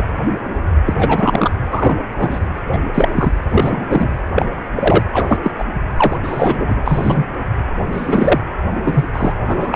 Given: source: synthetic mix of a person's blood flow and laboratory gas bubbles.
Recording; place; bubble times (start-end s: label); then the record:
Doppler ultrasound of blood flow; precordium
0.00-0.03 s: bubbles
0.85-1.51 s: bubbles
1.71-1.98 s: bubbles
2.17-2.40 s: bubbles
2.72-2.81 s: bubbles
2.94-3.08 s: bubbles
3.15-3.32 s: bubbles
3.50-3.84 s: bubbles
3.88-4.08 s: bubbles
4.35-4.49 s: bubbles
4.75-5.04 s: bubbles
5.12-5.39 s: bubbles
5.43-5.53 s: bubbles
5.58-5.65 s: bubbles
5.97-6.18 s: bubbles
6.23-6.82 s: bubbles
6.86-7.27 s: bubbles
7.92-8.40 s: bubbles
8.84-9.04 s: bubbles
9.13-9.34 s: bubbles
9.46-9.75 s: bubbles
From the record:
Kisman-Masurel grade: 233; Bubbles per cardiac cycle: several, 3 to 8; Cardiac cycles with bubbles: 50 to 99%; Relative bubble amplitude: loud (0.450 to 0.775); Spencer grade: 3 (all of the cardiac periods contain showers or single bubble signals, but not dominating or overriding the cardiac motion signals); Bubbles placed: anywhere in the cardiac cycle